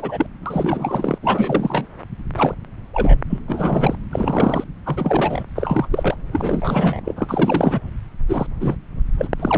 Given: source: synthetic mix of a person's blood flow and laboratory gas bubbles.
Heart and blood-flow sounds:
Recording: Doppler ultrasound of blood flow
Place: subclavian vein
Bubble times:
0.00-0.26 s: bubbles
0.45-1.18 s: bubbles
1.23-1.86 s: bubbles
2.36-2.55 s: bubbles
2.93-3.19 s: bubbles
3.29-3.40 s: bubbles
3.47-3.96 s: bubbles
4.12-4.64 s: bubbles
4.85-5.43 s: bubbles
5.56-5.88 s: bubbles
5.91-6.16 s: bubbles
6.32-7.01 s: bubbles
7.05-7.13 s: bubbles
7.16-7.80 s: bubbles
8.29-8.46 s: bubbles
8.61-8.76 s: bubbles
9.18-9.28 s: bubbles
9.39-9.58 s: bubbles
From the record:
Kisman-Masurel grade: 342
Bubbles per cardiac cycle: rolling drumbeat, 9 or more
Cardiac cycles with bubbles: 100%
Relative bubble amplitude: moderate (0.250 to 0.450)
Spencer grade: 3 (all of the cardiac periods contain showers or single bubble signals, but not dominating or overriding the cardiac motion signals)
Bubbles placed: anywhere in the cardiac cycle

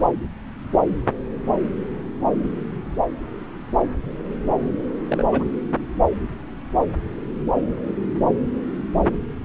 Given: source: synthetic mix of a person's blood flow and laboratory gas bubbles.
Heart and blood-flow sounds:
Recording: Doppler ultrasound of blood flow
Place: subclavian vein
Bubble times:
5.08-5.23 s: bubbles
5.31-5.43 s: bubbles
From the record:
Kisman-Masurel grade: 111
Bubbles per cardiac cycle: 1 to 2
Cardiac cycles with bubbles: 1 to 10%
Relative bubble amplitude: barely perceptible (0.100 to 0.250)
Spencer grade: 1 (occasional bubble signal discernible with the cardiac motion signal, with majority of cardiac periods free of bubbles)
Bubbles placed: anywhere in the cardiac cycle

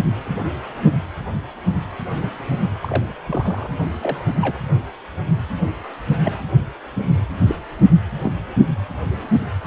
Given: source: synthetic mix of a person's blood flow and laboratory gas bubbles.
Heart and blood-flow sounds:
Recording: Doppler ultrasound of blood flow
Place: precordium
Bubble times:
2.81-3.05 s: bubbles
3.27-3.69 s: bubbles
4.01-4.17 s: bubbles
4.41-4.60 s: bubbles
6.24-6.44 s: bubbles
7.47-7.55 s: bubbles
8.23-8.32 s: bubbles
From the record:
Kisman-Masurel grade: 122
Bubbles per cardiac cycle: 1 to 2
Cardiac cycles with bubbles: 10 to 50%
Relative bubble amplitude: moderate (0.250 to 0.450)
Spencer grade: 2 (many but less than half of the cardiac periods contain bubble signals, singularly or in groups)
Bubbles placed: only in the low amplitude regions of the cardiac cycle

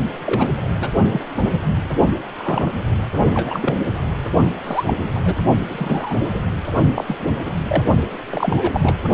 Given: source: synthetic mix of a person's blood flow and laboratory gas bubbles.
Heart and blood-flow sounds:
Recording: Doppler ultrasound of blood flow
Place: precordium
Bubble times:
0.26-0.48 s: bubbles
0.80-0.89 s: bubbles
1.12-1.21 s: bubbles
1.37-1.59 s: bubbles
2.37-2.71 s: bubbles
3.33-3.81 s: bubbles
4.63-5.08 s: bubbles
5.13-5.36 s: bubbles
5.70-6.18 s: bubbles
6.21-6.30 s: bubbles
6.34-6.39 s: bubbles
6.95-7.04 s: bubbles
7.08-7.31 s: bubbles
7.45-7.50 s: bubbles
7.67-7.84 s: bubbles
8.30-8.98 s: bubbles
From the record:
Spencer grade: 3 (all of the cardiac periods contain showers or single bubble signals, but not dominating or overriding the cardiac motion signals)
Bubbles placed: only in the low amplitude regions of the cardiac cycle

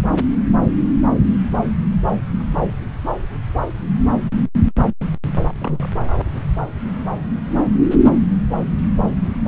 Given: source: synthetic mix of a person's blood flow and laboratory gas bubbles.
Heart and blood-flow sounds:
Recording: Doppler ultrasound of blood flow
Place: subclavian vein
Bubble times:
5.58-5.90 s: bubbles
From the record:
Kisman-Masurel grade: 211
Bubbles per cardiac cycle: several, 3 to 8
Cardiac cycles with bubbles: 1 to 10%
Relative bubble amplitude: barely perceptible (0.100 to 0.250)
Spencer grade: 1 (occasional bubble signal discernible with the cardiac motion signal, with majority of cardiac periods free of bubbles)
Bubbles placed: anywhere in the cardiac cycle

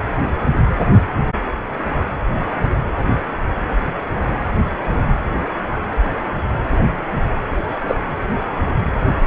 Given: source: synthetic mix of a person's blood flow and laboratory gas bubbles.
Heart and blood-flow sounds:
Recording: Doppler ultrasound of blood flow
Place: precordium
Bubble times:
7.87-7.95 s: bubbles
From the record:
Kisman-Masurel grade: 123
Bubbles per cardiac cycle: 1 to 2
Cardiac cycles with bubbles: 10 to 50%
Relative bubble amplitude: loud (0.450 to 0.775)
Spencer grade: 2 (many but less than half of the cardiac periods contain bubble signals, singularly or in groups)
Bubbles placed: anywhere in the cardiac cycle

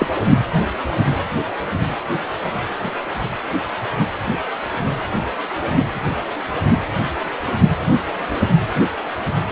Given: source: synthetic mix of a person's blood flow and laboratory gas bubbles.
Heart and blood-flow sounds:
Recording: Doppler ultrasound of blood flow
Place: precordium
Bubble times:
0.00-0.07 s: bubbles
From the record:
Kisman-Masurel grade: 123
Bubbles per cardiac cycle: 1 to 2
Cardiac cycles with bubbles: 10 to 50%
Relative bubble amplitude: loud (0.450 to 0.775)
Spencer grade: 2 (many but less than half of the cardiac periods contain bubble signals, singularly or in groups)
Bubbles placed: anywhere in the cardiac cycle

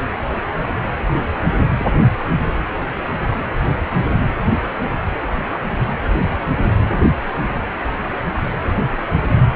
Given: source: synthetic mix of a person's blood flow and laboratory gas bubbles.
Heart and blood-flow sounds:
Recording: Doppler ultrasound of blood flow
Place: precordium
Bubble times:
1.79-1.87 s: bubbles
2.29-2.39 s: bubbles
From the record:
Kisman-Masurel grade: 111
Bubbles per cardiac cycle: 1 to 2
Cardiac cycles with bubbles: 1 to 10%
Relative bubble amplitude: barely perceptible (0.100 to 0.250)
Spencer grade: 1 (occasional bubble signal discernible with the cardiac motion signal, with majority of cardiac periods free of bubbles)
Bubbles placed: anywhere in the cardiac cycle

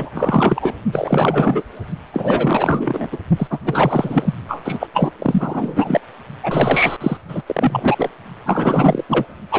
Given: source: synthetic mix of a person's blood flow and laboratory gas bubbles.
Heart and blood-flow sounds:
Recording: Doppler ultrasound of blood flow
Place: precordium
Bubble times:
0.00-0.11 s: bubbles
0.14-0.75 s: bubbles
0.92-1.62 s: bubbles
2.13-3.08 s: bubbles
3.11-3.17 s: bubbles
3.36-3.48 s: bubbles
3.50-3.59 s: bubbles
3.64-4.35 s: bubbles
4.47-4.87 s: bubbles
4.93-5.12 s: bubbles
5.18-6.00 s: bubbles
6.42-6.96 s: bubbles
7.00-7.17 s: bubbles
7.29-7.42 s: bubbles
7.46-8.10 s: bubbles
8.46-9.05 s: bubbles
9.08-9.26 s: bubbles
9.52-9.59 s: bubbles
From the record:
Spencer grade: 4 (maximum detectable bubble signal sounding continuously throughout systole and diastole of every cardiac period, and overriding the amplitude of the normal cardiac signals)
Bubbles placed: only in the low amplitude regions of the cardiac cycle

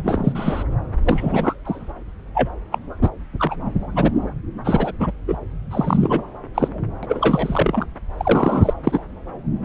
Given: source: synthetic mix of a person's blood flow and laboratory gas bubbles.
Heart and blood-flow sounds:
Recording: Doppler ultrasound of blood flow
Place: subclavian vein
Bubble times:
0.04-0.64 s: bubbles
1.04-1.54 s: bubbles
1.65-1.92 s: bubbles
2.35-2.49 s: bubbles
2.71-2.79 s: bubbles
3.00-3.10 s: bubbles
3.39-3.55 s: bubbles
3.96-4.11 s: bubbles
4.64-4.92 s: bubbles
5.00-5.11 s: bubbles
5.28-5.37 s: bubbles
5.70-6.23 s: bubbles
6.54-6.68 s: bubbles
7.03-7.86 s: bubbles
8.17-8.73 s: bubbles
8.83-9.03 s: bubbles
From the record:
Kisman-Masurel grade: 233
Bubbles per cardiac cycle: several, 3 to 8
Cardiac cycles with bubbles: 50 to 99%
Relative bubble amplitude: loud (0.450 to 0.775)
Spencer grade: 3 (all of the cardiac periods contain showers or single bubble signals, but not dominating or overriding the cardiac motion signals)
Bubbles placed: anywhere in the cardiac cycle

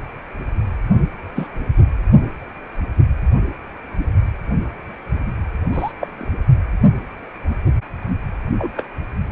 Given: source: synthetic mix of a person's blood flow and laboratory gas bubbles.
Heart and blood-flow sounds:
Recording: Doppler ultrasound of blood flow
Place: precordium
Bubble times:
1.35-1.47 s: bubbles
5.72-5.92 s: bubbles
6.00-6.30 s: bubbles
8.58-8.72 s: bubbles
8.74-8.86 s: bubbles
From the record:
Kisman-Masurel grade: 122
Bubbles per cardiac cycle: 1 to 2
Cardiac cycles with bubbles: 10 to 50%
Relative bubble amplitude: moderate (0.250 to 0.450)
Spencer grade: 2 (many but less than half of the cardiac periods contain bubble signals, singularly or in groups)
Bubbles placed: anywhere in the cardiac cycle

